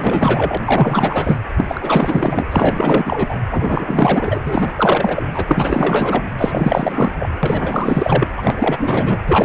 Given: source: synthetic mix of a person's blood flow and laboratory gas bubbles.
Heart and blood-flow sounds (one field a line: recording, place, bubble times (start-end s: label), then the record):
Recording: Doppler ultrasound of blood flow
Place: precordium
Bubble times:
0.00-0.57 s: bubbles
0.66-1.39 s: bubbles
1.57-2.44 s: bubbles
2.50-3.40 s: bubbles
3.50-4.39 s: bubbles
4.43-5.31 s: bubbles
5.33-6.22 s: bubbles
6.37-7.29 s: bubbles
7.43-8.26 s: bubbles
8.36-9.19 s: bubbles
9.26-9.45 s: bubbles
From the record:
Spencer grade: 4 (maximum detectable bubble signal sounding continuously throughout systole and diastole of every cardiac period, and overriding the amplitude of the normal cardiac signals)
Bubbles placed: anywhere in the cardiac cycle